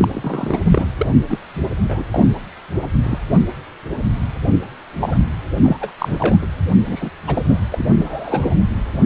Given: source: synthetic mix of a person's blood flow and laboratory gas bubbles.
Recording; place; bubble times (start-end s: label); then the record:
Doppler ultrasound of blood flow; precordium
0.00-0.08 s: bubbles
0.13-0.59 s: bubbles
0.65-0.88 s: bubbles
0.99-1.07 s: bubbles
1.29-1.40 s: bubbles
1.89-2.03 s: bubbles
2.10-2.26 s: bubbles
2.82-2.87 s: bubbles
3.02-3.19 s: bubbles
5.00-5.17 s: bubbles
5.63-5.77 s: bubbles
5.80-5.92 s: bubbles
5.98-6.37 s: bubbles
6.42-6.46 s: bubbles
6.85-7.10 s: bubbles
7.26-7.44 s: bubbles
7.48-7.63 s: bubbles
7.71-7.86 s: bubbles
7.96-8.54 s: bubbles
From the record:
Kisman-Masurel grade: 232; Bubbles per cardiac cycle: several, 3 to 8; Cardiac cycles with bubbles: 50 to 99%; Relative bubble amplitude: moderate (0.250 to 0.450); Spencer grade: 3 (all of the cardiac periods contain showers or single bubble signals, but not dominating or overriding the cardiac motion signals); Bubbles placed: anywhere in the cardiac cycle